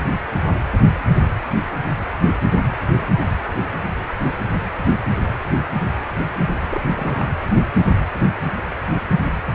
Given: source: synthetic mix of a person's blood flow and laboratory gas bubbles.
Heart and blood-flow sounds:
Doppler ultrasound of blood flow; precordium
6.70-6.82 s: bubbles
6.97-7.35 s: bubbles
From the record:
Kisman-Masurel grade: 211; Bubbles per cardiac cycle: several, 3 to 8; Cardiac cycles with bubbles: 1 to 10%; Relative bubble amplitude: barely perceptible (0.100 to 0.250); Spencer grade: 1 (occasional bubble signal discernible with the cardiac motion signal, with majority of cardiac periods free of bubbles); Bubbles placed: anywhere in the cardiac cycle

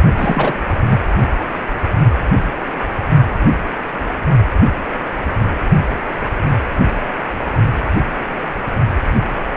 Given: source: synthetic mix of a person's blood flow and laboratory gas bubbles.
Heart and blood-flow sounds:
Doppler ultrasound of blood flow; precordium
0.17-0.53 s: bubbles
0.90-1.01 s: bubbles
From the record:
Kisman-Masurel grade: 213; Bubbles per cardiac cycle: several, 3 to 8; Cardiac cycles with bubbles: 1 to 10%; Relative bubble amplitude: loud (0.450 to 0.775); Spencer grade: 1 (occasional bubble signal discernible with the cardiac motion signal, with majority of cardiac periods free of bubbles); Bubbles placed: only in the low amplitude regions of the cardiac cycle

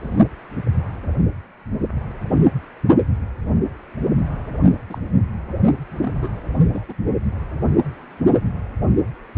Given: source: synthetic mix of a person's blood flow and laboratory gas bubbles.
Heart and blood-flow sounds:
Doppler ultrasound of blood flow; precordium
0.00-0.18 s: bubbles
4.89-4.98 s: bubbles
6.01-6.12 s: bubbles
6.22-6.29 s: bubbles
6.72-6.84 s: bubbles
6.88-6.93 s: bubbles
From the record:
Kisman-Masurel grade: 121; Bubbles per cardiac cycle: 1 to 2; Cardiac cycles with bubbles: 10 to 50%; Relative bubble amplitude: barely perceptible (0.100 to 0.250); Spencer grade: 2 (many but less than half of the cardiac periods contain bubble signals, singularly or in groups); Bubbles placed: anywhere in the cardiac cycle

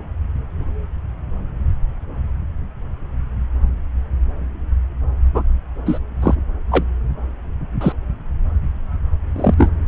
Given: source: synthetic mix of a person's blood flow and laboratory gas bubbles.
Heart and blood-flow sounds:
Doppler ultrasound of blood flow; subclavian vein
5.34-5.42 s: bubbles
5.85-5.99 s: bubbles
6.22-6.34 s: bubbles
6.71-6.84 s: bubbles
7.80-7.92 s: bubbles
9.36-9.54 s: bubbles
9.58-9.70 s: bubbles
From the record:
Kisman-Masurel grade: 123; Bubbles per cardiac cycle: 1 to 2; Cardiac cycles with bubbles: 10 to 50%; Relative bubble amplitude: loud (0.450 to 0.775); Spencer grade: 2 (many but less than half of the cardiac periods contain bubble signals, singularly or in groups); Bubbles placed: anywhere in the cardiac cycle

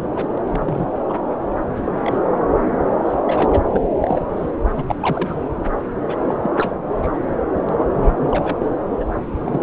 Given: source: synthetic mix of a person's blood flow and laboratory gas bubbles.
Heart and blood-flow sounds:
Doppler ultrasound of blood flow; subclavian vein
0.15-0.38 s: bubbles
0.46-0.86 s: bubbles
1.08-1.14 s: bubbles
1.75-1.81 s: bubbles
1.84-1.92 s: bubbles
1.97-2.18 s: bubbles
3.04-3.12 s: bubbles
3.25-3.60 s: bubbles
3.73-3.88 s: bubbles
3.90-4.26 s: bubbles
4.36-4.51 s: bubbles
4.75-4.84 s: bubbles
4.88-4.96 s: bubbles
5.01-5.41 s: bubbles
6.08-6.17 s: bubbles
6.29-6.35 s: bubbles
6.42-6.51 s: bubbles
6.58-6.73 s: bubbles
7.03-7.19 s: bubbles
7.69-8.70 s: bubbles
9.00-9.04 s: bubbles
9.41-9.63 s: bubbles
From the record:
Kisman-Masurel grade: 242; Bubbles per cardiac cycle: several, 3 to 8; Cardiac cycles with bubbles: 100%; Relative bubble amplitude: moderate (0.250 to 0.450); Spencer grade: 3 (all of the cardiac periods contain showers or single bubble signals, but not dominating or overriding the cardiac motion signals); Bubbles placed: anywhere in the cardiac cycle

